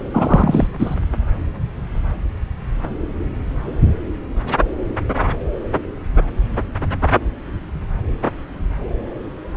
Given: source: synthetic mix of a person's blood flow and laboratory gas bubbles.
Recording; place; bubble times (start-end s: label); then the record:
Doppler ultrasound of blood flow; subclavian vein
0.12-0.68 s: bubbles
0.79-0.95 s: bubbles
From the record:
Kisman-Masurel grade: 213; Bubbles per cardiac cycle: several, 3 to 8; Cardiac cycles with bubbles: 1 to 10%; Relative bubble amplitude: loud (0.450 to 0.775); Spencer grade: 1 (occasional bubble signal discernible with the cardiac motion signal, with majority of cardiac periods free of bubbles); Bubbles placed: anywhere in the cardiac cycle